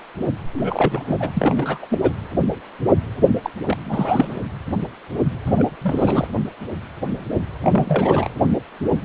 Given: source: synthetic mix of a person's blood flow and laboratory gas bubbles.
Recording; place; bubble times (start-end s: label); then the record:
Doppler ultrasound of blood flow; precordium
0.53-1.17 s: bubbles
1.20-1.30 s: bubbles
1.33-1.78 s: bubbles
1.82-1.86 s: bubbles
1.90-1.99 s: bubbles
2.01-2.13 s: bubbles
3.43-3.50 s: bubbles
3.64-4.43 s: bubbles
5.46-5.53 s: bubbles
5.56-5.70 s: bubbles
5.81-6.27 s: bubbles
7.60-8.29 s: bubbles
From the record:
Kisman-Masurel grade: 332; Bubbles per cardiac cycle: rolling drumbeat, 9 or more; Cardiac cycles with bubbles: 50 to 99%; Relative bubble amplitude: moderate (0.250 to 0.450); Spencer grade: 3 (all of the cardiac periods contain showers or single bubble signals, but not dominating or overriding the cardiac motion signals); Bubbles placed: anywhere in the cardiac cycle